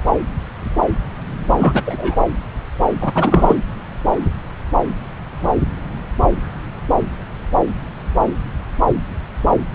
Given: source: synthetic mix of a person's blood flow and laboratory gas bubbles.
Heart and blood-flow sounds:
Doppler ultrasound of blood flow; subclavian vein
1.58-1.82 s: bubbles
1.86-2.15 s: bubbles
3.00-3.12 s: bubbles
3.15-3.56 s: bubbles
From the record:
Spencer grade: 2 (many but less than half of the cardiac periods contain bubble signals, singularly or in groups); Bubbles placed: anywhere in the cardiac cycle

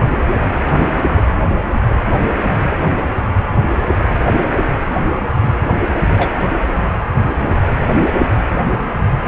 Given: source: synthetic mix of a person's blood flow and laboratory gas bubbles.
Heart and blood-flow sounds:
Doppler ultrasound of blood flow; precordium
6.17-6.32 s: bubbles
From the record:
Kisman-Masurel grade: 123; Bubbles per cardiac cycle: 1 to 2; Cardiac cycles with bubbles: 10 to 50%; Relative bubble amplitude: loud (0.450 to 0.775); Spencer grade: 2 (many but less than half of the cardiac periods contain bubble signals, singularly or in groups); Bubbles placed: anywhere in the cardiac cycle

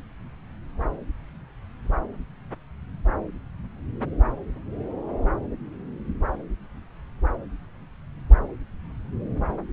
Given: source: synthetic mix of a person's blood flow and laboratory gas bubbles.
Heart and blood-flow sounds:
Doppler ultrasound of blood flow; subclavian vein
no bubbles
From the record:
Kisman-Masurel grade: 000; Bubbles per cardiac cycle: 0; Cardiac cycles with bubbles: 0%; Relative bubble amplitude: no bubbles discernible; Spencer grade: 0 (complete lack of bubble signals)

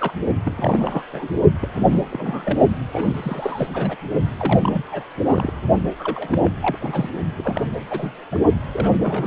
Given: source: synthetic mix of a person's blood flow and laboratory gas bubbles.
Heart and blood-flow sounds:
Doppler ultrasound of blood flow; precordium
0.00-0.13 s: bubbles
0.45-1.03 s: bubbles
1.12-1.27 s: bubbles
1.61-1.69 s: bubbles
1.75-2.04 s: bubbles
2.10-2.58 s: bubbles
2.92-3.67 s: bubbles
3.73-3.96 s: bubbles
4.37-5.06 s: bubbles
5.28-5.51 s: bubbles
5.99-6.49 s: bubbles
6.62-6.77 s: bubbles
6.80-7.10 s: bubbles
7.37-8.20 s: bubbles
8.32-8.39 s: bubbles
8.72-9.27 s: bubbles
From the record:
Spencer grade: 3 (all of the cardiac periods contain showers or single bubble signals, but not dominating or overriding the cardiac motion signals); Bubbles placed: only in the low amplitude regions of the cardiac cycle

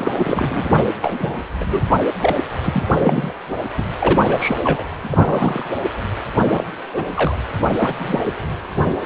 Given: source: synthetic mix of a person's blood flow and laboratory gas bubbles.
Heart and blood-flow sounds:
Doppler ultrasound of blood flow; precordium
0.00-0.09 s: bubbles
0.16-0.70 s: bubbles
0.77-0.83 s: bubbles
1.03-1.31 s: bubbles
1.60-1.80 s: bubbles
2.21-2.36 s: bubbles
2.63-2.86 s: bubbles
3.00-3.33 s: bubbles
3.77-3.85 s: bubbles
4.00-4.21 s: bubbles
4.25-4.56 s: bubbles
4.64-4.88 s: bubbles
5.04-5.08 s: bubbles
5.11-5.69 s: bubbles
6.37-6.66 s: bubbles
6.94-7.05 s: bubbles
7.15-7.37 s: bubbles
7.79-7.94 s: bubbles
7.97-8.19 s: bubbles
8.74-8.96 s: bubbles
9.01-9.05 s: bubbles
From the record:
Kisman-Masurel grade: 242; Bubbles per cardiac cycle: several, 3 to 8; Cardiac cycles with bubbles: 100%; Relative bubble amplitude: moderate (0.250 to 0.450); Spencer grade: 3 (all of the cardiac periods contain showers or single bubble signals, but not dominating or overriding the cardiac motion signals); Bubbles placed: anywhere in the cardiac cycle

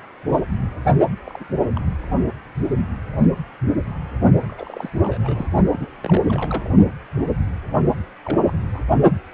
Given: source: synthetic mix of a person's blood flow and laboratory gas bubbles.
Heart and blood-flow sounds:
Doppler ultrasound of blood flow; precordium
1.28-1.44 s: bubbles
1.77-1.81 s: bubbles
4.42-4.90 s: bubbles
5.03-5.47 s: bubbles
5.72-5.86 s: bubbles
6.01-6.22 s: bubbles
6.28-6.73 s: bubbles
8.25-8.38 s: bubbles
8.44-8.58 s: bubbles
8.72-8.84 s: bubbles
From the record:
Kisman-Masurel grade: 221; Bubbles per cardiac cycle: several, 3 to 8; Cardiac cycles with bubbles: 10 to 50%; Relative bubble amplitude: barely perceptible (0.100 to 0.250); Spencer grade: 2 (many but less than half of the cardiac periods contain bubble signals, singularly or in groups); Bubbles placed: only in the low amplitude regions of the cardiac cycle

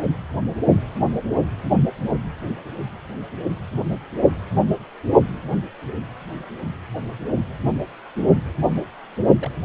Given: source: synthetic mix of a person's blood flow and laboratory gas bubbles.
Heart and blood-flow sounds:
Doppler ultrasound of blood flow; precordium
9.38-9.49 s: bubbles
From the record:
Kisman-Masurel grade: 111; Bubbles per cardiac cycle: 1 to 2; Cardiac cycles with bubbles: 1 to 10%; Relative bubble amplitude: barely perceptible (0.100 to 0.250); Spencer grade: 1 (occasional bubble signal discernible with the cardiac motion signal, with majority of cardiac periods free of bubbles); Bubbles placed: only in the low amplitude regions of the cardiac cycle

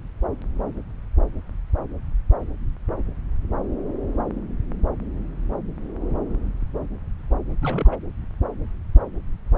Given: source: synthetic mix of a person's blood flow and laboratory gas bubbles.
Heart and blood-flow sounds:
Doppler ultrasound of blood flow; subclavian vein
7.59-7.97 s: bubbles
From the record:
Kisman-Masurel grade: 211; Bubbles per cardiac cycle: several, 3 to 8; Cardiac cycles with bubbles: 1 to 10%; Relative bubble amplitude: barely perceptible (0.100 to 0.250); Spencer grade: 1 (occasional bubble signal discernible with the cardiac motion signal, with majority of cardiac periods free of bubbles); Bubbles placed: anywhere in the cardiac cycle

